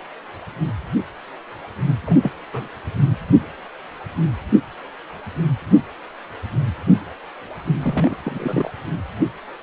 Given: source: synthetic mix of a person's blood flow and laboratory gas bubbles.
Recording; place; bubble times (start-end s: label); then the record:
Doppler ultrasound of blood flow; precordium
2.06-2.19 s: bubbles
2.22-2.31 s: bubbles
2.52-2.68 s: bubbles
7.79-8.17 s: bubbles
8.25-8.71 s: bubbles
From the record:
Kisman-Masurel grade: 221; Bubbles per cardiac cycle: several, 3 to 8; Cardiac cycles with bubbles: 10 to 50%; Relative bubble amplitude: barely perceptible (0.100 to 0.250); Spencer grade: 2 (many but less than half of the cardiac periods contain bubble signals, singularly or in groups); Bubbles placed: anywhere in the cardiac cycle